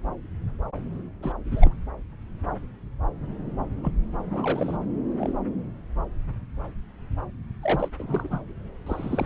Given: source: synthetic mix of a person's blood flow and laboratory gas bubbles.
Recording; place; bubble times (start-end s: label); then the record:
Doppler ultrasound of blood flow; subclavian vein
1.22-1.32 s: bubbles
1.51-1.74 s: bubbles
3.76-3.91 s: bubbles
4.30-4.77 s: bubbles
5.19-5.34 s: bubbles
7.63-7.88 s: bubbles
7.99-8.40 s: bubbles
8.86-9.26 s: bubbles
From the record:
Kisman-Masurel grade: 222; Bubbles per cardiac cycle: several, 3 to 8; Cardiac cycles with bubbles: 10 to 50%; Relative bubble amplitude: moderate (0.250 to 0.450); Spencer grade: 2 (many but less than half of the cardiac periods contain bubble signals, singularly or in groups); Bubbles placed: anywhere in the cardiac cycle